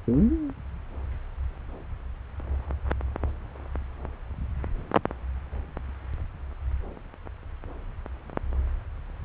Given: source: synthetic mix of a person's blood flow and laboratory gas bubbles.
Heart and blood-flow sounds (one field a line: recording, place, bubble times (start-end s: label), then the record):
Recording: Doppler ultrasound of blood flow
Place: subclavian vein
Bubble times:
no bubbles
From the record:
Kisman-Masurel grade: 000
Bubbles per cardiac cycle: 0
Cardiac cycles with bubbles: 0%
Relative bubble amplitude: no bubbles discernible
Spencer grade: 0 (complete lack of bubble signals)